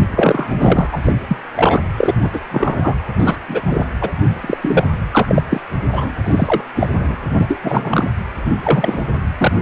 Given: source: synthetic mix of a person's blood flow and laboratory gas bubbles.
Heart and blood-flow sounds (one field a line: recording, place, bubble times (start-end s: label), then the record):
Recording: Doppler ultrasound of blood flow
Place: precordium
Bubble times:
0.11-0.52 s: bubbles
0.59-0.89 s: bubbles
0.92-0.99 s: bubbles
1.03-1.12 s: bubbles
1.27-1.37 s: bubbles
1.55-1.80 s: bubbles
1.97-2.15 s: bubbles
2.21-2.40 s: bubbles
2.51-2.95 s: bubbles
3.19-3.37 s: bubbles
3.48-3.63 s: bubbles
3.67-3.86 s: bubbles
4.00-4.10 s: bubbles
4.41-4.58 s: bubbles
4.61-4.86 s: bubbles
5.11-5.42 s: bubbles
5.50-5.60 s: bubbles
5.92-6.11 s: bubbles
6.24-6.61 s: bubbles
6.75-6.88 s: bubbles
6.93-7.17 s: bubbles
7.39-8.10 s: bubbles
8.62-8.99 s: bubbles
9.38-9.52 s: bubbles
From the record:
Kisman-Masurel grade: 243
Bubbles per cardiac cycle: several, 3 to 8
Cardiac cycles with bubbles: 100%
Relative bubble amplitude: loud (0.450 to 0.775)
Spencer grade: 3 (all of the cardiac periods contain showers or single bubble signals, but not dominating or overriding the cardiac motion signals)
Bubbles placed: anywhere in the cardiac cycle